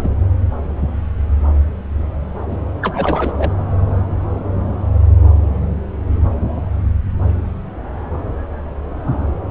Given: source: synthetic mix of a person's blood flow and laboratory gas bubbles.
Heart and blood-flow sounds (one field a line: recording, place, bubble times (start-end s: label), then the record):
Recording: Doppler ultrasound of blood flow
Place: subclavian vein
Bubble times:
0.03-0.09 s: bubbles
2.50-2.57 s: bubbles
2.82-3.33 s: bubbles
3.37-3.51 s: bubbles
From the record:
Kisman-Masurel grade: 222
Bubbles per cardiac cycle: several, 3 to 8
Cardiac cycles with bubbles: 10 to 50%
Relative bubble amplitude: moderate (0.250 to 0.450)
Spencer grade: 2 (many but less than half of the cardiac periods contain bubble signals, singularly or in groups)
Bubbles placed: anywhere in the cardiac cycle